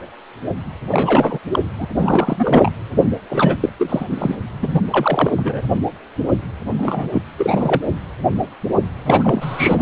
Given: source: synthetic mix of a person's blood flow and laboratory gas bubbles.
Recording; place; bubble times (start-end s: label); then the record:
Doppler ultrasound of blood flow; precordium
0.91-1.39 s: bubbles
1.51-1.59 s: bubbles
1.78-1.88 s: bubbles
1.96-2.72 s: bubbles
3.29-3.58 s: bubbles
3.60-3.69 s: bubbles
3.79-4.05 s: bubbles
4.10-4.35 s: bubbles
4.62-4.82 s: bubbles
4.90-5.62 s: bubbles
6.79-7.22 s: bubbles
7.38-7.81 s: bubbles
9.05-9.82 s: bubbles
From the record:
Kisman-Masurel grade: 333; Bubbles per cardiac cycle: rolling drumbeat, 9 or more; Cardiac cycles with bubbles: 50 to 99%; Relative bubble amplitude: loud (0.450 to 0.775); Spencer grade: 3 (all of the cardiac periods contain showers or single bubble signals, but not dominating or overriding the cardiac motion signals); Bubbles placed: anywhere in the cardiac cycle